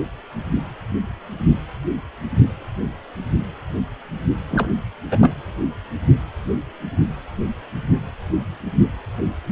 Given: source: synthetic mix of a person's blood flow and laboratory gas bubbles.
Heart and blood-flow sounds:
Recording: Doppler ultrasound of blood flow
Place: precordium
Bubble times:
4.50-4.75 s: bubbles
5.11-5.33 s: bubbles
From the record:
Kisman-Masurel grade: 212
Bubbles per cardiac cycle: several, 3 to 8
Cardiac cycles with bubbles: 1 to 10%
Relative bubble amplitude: moderate (0.250 to 0.450)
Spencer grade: 1 (occasional bubble signal discernible with the cardiac motion signal, with majority of cardiac periods free of bubbles)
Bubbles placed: anywhere in the cardiac cycle

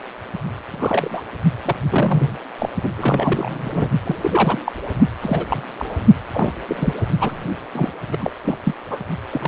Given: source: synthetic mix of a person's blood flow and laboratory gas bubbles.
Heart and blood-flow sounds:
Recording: Doppler ultrasound of blood flow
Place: precordium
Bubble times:
0.65-1.21 s: bubbles
1.65-1.75 s: bubbles
1.89-2.38 s: bubbles
2.58-2.69 s: bubbles
2.83-2.90 s: bubbles
2.97-3.89 s: bubbles
4.05-4.59 s: bubbles
4.65-4.72 s: bubbles
5.21-5.62 s: bubbles
5.78-5.96 s: bubbles
6.32-6.54 s: bubbles
6.69-6.94 s: bubbles
7.19-7.44 s: bubbles
7.72-7.91 s: bubbles
8.12-8.17 s: bubbles
8.20-8.32 s: bubbles
8.44-8.58 s: bubbles
8.63-8.75 s: bubbles
8.90-8.99 s: bubbles
9.31-9.48 s: bubbles
From the record:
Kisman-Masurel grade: 232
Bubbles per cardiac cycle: several, 3 to 8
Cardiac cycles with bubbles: 50 to 99%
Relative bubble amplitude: moderate (0.250 to 0.450)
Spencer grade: 3 (all of the cardiac periods contain showers or single bubble signals, but not dominating or overriding the cardiac motion signals)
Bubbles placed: only in the low amplitude regions of the cardiac cycle

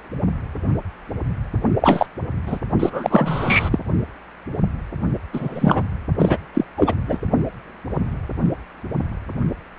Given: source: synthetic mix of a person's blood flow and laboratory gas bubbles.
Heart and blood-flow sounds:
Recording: Doppler ultrasound of blood flow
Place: precordium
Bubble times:
1.81-2.07 s: bubbles
2.47-2.58 s: bubbles
2.79-3.79 s: bubbles
5.33-5.83 s: bubbles
6.19-6.38 s: bubbles
6.54-6.65 s: bubbles
6.77-6.95 s: bubbles
7.08-7.18 s: bubbles
From the record:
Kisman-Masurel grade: 233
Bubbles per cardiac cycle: several, 3 to 8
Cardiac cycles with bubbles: 50 to 99%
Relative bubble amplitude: loud (0.450 to 0.775)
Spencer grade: 3 (all of the cardiac periods contain showers or single bubble signals, but not dominating or overriding the cardiac motion signals)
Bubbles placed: only in the low amplitude regions of the cardiac cycle

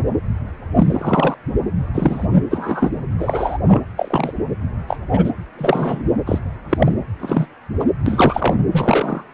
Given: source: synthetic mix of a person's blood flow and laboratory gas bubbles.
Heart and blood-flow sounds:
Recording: Doppler ultrasound of blood flow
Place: precordium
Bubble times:
0.75-1.35 s: bubbles
1.94-2.27 s: bubbles
2.50-2.90 s: bubbles
3.19-3.57 s: bubbles
3.68-3.82 s: bubbles
3.97-4.32 s: bubbles
4.88-4.97 s: bubbles
5.13-5.30 s: bubbles
5.58-6.02 s: bubbles
6.26-6.38 s: bubbles
6.69-6.92 s: bubbles
7.20-7.46 s: bubbles
7.79-7.84 s: bubbles
8.06-8.55 s: bubbles
8.71-9.24 s: bubbles
From the record:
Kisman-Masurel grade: 243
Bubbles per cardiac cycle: several, 3 to 8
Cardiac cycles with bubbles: 100%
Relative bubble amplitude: loud (0.450 to 0.775)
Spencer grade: 3 (all of the cardiac periods contain showers or single bubble signals, but not dominating or overriding the cardiac motion signals)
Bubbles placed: anywhere in the cardiac cycle

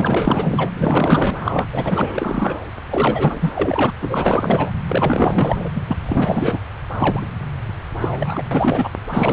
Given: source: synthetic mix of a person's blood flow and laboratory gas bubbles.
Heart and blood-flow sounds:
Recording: Doppler ultrasound of blood flow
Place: subclavian vein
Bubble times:
0.00-0.70 s: bubbles
0.75-1.67 s: bubbles
1.71-2.57 s: bubbles
2.90-3.90 s: bubbles
4.01-4.71 s: bubbles
4.89-5.69 s: bubbles
5.74-6.61 s: bubbles
6.99-7.27 s: bubbles
8.00-8.08 s: bubbles
8.11-8.42 s: bubbles
8.51-8.88 s: bubbles
9.09-9.33 s: bubbles
From the record:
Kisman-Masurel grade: 444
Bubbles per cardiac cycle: continuous sound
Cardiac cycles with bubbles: 100%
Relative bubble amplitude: maximal (0.775 to 0.999)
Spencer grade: 4 (maximum detectable bubble signal sounding continuously throughout systole and diastole of every cardiac period, and overriding the amplitude of the normal cardiac signals)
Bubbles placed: anywhere in the cardiac cycle

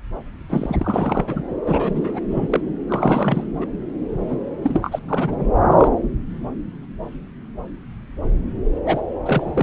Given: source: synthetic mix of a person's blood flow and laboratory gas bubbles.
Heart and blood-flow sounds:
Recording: Doppler ultrasound of blood flow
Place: subclavian vein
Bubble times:
0.49-0.77 s: bubbles
0.80-1.42 s: bubbles
1.65-2.20 s: bubbles
2.30-2.60 s: bubbles
2.88-3.44 s: bubbles
3.60-3.66 s: bubbles
4.29-4.37 s: bubbles
4.62-4.99 s: bubbles
5.08-5.47 s: bubbles
5.71-5.88 s: bubbles
8.86-9.02 s: bubbles
9.26-9.63 s: bubbles
From the record:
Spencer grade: 3 (all of the cardiac periods contain showers or single bubble signals, but not dominating or overriding the cardiac motion signals)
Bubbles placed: anywhere in the cardiac cycle

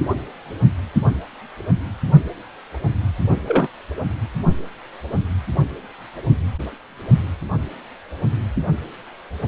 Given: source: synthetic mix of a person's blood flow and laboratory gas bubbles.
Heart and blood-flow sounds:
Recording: Doppler ultrasound of blood flow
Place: precordium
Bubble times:
3.46-3.67 s: bubbles
From the record:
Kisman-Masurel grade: 113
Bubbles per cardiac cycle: 1 to 2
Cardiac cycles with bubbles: 1 to 10%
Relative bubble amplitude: loud (0.450 to 0.775)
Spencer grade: 1 (occasional bubble signal discernible with the cardiac motion signal, with majority of cardiac periods free of bubbles)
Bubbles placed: only in the low amplitude regions of the cardiac cycle

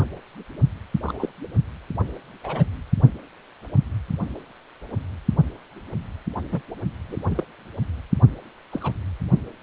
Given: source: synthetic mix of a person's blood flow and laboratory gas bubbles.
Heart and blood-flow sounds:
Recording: Doppler ultrasound of blood flow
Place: precordium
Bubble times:
1.06-1.29 s: bubbles
2.44-2.65 s: bubbles
6.52-6.62 s: bubbles
7.08-7.17 s: bubbles
7.28-7.44 s: bubbles
8.71-8.92 s: bubbles
From the record:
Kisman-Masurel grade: 121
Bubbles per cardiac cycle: 1 to 2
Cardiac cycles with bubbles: 10 to 50%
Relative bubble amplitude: barely perceptible (0.100 to 0.250)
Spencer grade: 2 (many but less than half of the cardiac periods contain bubble signals, singularly or in groups)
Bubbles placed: only in the low amplitude regions of the cardiac cycle

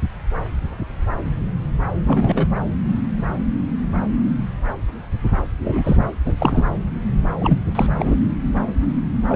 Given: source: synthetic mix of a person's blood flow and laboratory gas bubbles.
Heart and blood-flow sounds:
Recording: Doppler ultrasound of blood flow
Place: subclavian vein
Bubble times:
2.06-2.46 s: bubbles
5.62-5.96 s: bubbles
6.25-6.33 s: bubbles
6.39-6.65 s: bubbles
7.40-7.58 s: bubbles
7.75-7.87 s: bubbles
7.98-8.16 s: bubbles
9.29-9.36 s: bubbles
From the record:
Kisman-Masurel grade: 222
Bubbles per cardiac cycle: several, 3 to 8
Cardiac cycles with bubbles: 10 to 50%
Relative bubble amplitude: moderate (0.250 to 0.450)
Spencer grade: 2 (many but less than half of the cardiac periods contain bubble signals, singularly or in groups)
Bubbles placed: anywhere in the cardiac cycle

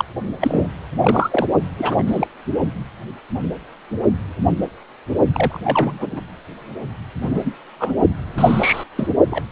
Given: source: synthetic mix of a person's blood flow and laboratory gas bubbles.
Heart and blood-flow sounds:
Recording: Doppler ultrasound of blood flow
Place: precordium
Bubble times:
0.00-0.05 s: bubbles
0.41-0.67 s: bubbles
1.02-1.47 s: bubbles
1.79-2.27 s: bubbles
5.33-5.60 s: bubbles
5.64-6.21 s: bubbles
7.21-7.56 s: bubbles
7.79-7.95 s: bubbles
8.37-8.83 s: bubbles
8.96-9.08 s: bubbles
9.30-9.43 s: bubbles
From the record:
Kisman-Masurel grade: 232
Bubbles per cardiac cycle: several, 3 to 8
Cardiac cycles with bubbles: 50 to 99%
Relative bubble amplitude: moderate (0.250 to 0.450)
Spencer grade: 3 (all of the cardiac periods contain showers or single bubble signals, but not dominating or overriding the cardiac motion signals)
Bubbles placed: only in the low amplitude regions of the cardiac cycle

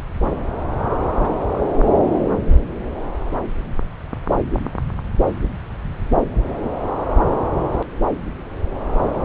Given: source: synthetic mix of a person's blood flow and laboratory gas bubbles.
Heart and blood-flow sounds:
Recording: Doppler ultrasound of blood flow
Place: subclavian vein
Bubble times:
1.02-1.38 s: bubbles
1.53-1.60 s: bubbles
From the record:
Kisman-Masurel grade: 221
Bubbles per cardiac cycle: several, 3 to 8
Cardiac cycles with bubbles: 10 to 50%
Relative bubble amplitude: barely perceptible (0.100 to 0.250)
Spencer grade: 2 (many but less than half of the cardiac periods contain bubble signals, singularly or in groups)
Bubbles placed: anywhere in the cardiac cycle

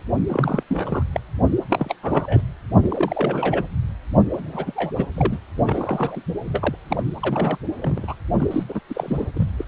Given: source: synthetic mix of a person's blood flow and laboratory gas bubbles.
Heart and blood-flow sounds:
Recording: Doppler ultrasound of blood flow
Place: precordium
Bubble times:
0.27-0.63 s: bubbles
0.69-1.03 s: bubbles
1.12-1.21 s: bubbles
1.69-1.95 s: bubbles
2.02-2.40 s: bubbles
2.83-3.64 s: bubbles
4.33-4.72 s: bubbles
4.75-4.91 s: bubbles
4.96-5.05 s: bubbles
5.16-5.38 s: bubbles
5.58-5.62 s: bubbles
5.67-6.22 s: bubbles
6.46-6.75 s: bubbles
6.88-7.04 s: bubbles
7.22-7.58 s: bubbles
7.80-8.15 s: bubbles
8.38-8.47 s: bubbles
8.51-8.63 s: bubbles
8.69-8.80 s: bubbles
8.89-9.27 s: bubbles
9.34-9.48 s: bubbles
9.57-9.64 s: bubbles
From the record:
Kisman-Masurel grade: 332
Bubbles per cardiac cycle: rolling drumbeat, 9 or more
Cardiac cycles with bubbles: 50 to 99%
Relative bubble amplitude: moderate (0.250 to 0.450)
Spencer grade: 3 (all of the cardiac periods contain showers or single bubble signals, but not dominating or overriding the cardiac motion signals)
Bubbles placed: anywhere in the cardiac cycle

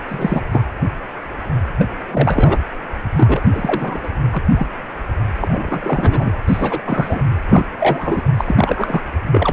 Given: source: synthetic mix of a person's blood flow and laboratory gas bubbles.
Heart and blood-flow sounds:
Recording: Doppler ultrasound of blood flow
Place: precordium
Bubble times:
0.08-0.46 s: bubbles
0.51-0.63 s: bubbles
1.78-1.89 s: bubbles
2.07-2.58 s: bubbles
3.15-3.40 s: bubbles
3.51-3.99 s: bubbles
4.03-4.09 s: bubbles
4.32-4.42 s: bubbles
4.55-4.67 s: bubbles
5.40-6.37 s: bubbles
6.47-6.82 s: bubbles
6.86-7.23 s: bubbles
7.49-7.66 s: bubbles
7.80-8.23 s: bubbles
8.37-9.03 s: bubbles
9.31-9.53 s: bubbles
From the record:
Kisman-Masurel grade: 333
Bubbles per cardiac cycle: rolling drumbeat, 9 or more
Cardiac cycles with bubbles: 50 to 99%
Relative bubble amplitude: loud (0.450 to 0.775)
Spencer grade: 3 (all of the cardiac periods contain showers or single bubble signals, but not dominating or overriding the cardiac motion signals)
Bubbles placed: anywhere in the cardiac cycle

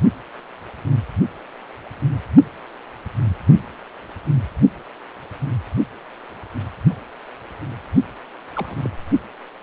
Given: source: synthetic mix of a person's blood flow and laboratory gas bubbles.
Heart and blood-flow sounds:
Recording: Doppler ultrasound of blood flow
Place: precordium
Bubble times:
8.54-8.90 s: bubbles
From the record:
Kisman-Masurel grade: 111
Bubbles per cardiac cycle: 1 to 2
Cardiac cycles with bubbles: 1 to 10%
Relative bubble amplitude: barely perceptible (0.100 to 0.250)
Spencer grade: 1 (occasional bubble signal discernible with the cardiac motion signal, with majority of cardiac periods free of bubbles)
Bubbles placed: only in the low amplitude regions of the cardiac cycle

